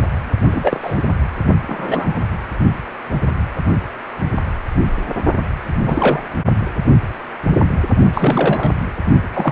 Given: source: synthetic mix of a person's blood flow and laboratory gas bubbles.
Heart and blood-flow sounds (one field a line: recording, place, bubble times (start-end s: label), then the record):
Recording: Doppler ultrasound of blood flow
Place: precordium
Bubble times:
0.51-1.02 s: bubbles
1.67-2.31 s: bubbles
5.86-6.24 s: bubbles
8.13-8.71 s: bubbles
9.33-9.52 s: bubbles
From the record:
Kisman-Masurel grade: 233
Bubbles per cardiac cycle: several, 3 to 8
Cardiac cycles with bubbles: 50 to 99%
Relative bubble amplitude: loud (0.450 to 0.775)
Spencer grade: 3 (all of the cardiac periods contain showers or single bubble signals, but not dominating or overriding the cardiac motion signals)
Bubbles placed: only in the low amplitude regions of the cardiac cycle